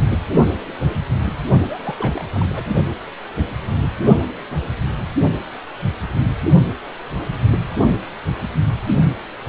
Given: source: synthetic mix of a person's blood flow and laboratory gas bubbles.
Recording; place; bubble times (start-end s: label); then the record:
Doppler ultrasound of blood flow; precordium
1.61-1.95 s: bubbles
1.97-2.23 s: bubbles
2.34-2.46 s: bubbles
2.50-2.65 s: bubbles
From the record:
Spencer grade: 1 (occasional bubble signal discernible with the cardiac motion signal, with majority of cardiac periods free of bubbles); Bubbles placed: only in the low amplitude regions of the cardiac cycle